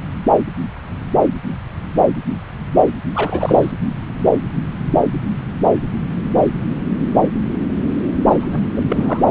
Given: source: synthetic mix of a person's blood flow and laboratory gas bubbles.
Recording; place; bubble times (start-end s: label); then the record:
Doppler ultrasound of blood flow; subclavian vein
3.15-3.71 s: bubbles
8.30-8.60 s: bubbles
8.76-9.26 s: bubbles
From the record:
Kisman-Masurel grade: 222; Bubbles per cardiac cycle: several, 3 to 8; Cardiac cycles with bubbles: 10 to 50%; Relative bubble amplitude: moderate (0.250 to 0.450); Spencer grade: 2 (many but less than half of the cardiac periods contain bubble signals, singularly or in groups); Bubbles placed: anywhere in the cardiac cycle